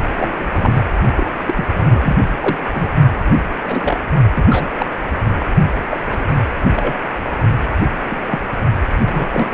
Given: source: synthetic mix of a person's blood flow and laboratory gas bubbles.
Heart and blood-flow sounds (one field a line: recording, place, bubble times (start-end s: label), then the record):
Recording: Doppler ultrasound of blood flow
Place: precordium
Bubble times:
0.09-0.82 s: bubbles
1.17-1.27 s: bubbles
1.48-1.54 s: bubbles
1.56-1.65 s: bubbles
1.73-2.17 s: bubbles
2.40-2.61 s: bubbles
2.73-2.89 s: bubbles
3.64-3.97 s: bubbles
4.35-4.45 s: bubbles
4.50-4.72 s: bubbles
4.78-4.86 s: bubbles
5.38-5.46 s: bubbles
5.91-5.97 s: bubbles
6.12-6.35 s: bubbles
6.75-6.93 s: bubbles
8.10-8.16 s: bubbles
8.26-8.43 s: bubbles
9.04-9.26 s: bubbles
9.31-9.54 s: bubbles
From the record:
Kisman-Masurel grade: 242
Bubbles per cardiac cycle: several, 3 to 8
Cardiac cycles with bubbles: 100%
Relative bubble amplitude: moderate (0.250 to 0.450)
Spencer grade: 3 (all of the cardiac periods contain showers or single bubble signals, but not dominating or overriding the cardiac motion signals)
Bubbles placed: only in the low amplitude regions of the cardiac cycle